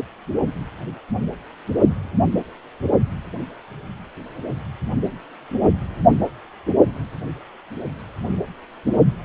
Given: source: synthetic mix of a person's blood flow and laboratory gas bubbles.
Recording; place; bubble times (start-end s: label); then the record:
Doppler ultrasound of blood flow; precordium
no bubbles
From the record:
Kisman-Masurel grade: 000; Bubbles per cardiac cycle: 0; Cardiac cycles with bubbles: 0%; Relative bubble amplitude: no bubbles discernible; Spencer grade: 0 (complete lack of bubble signals)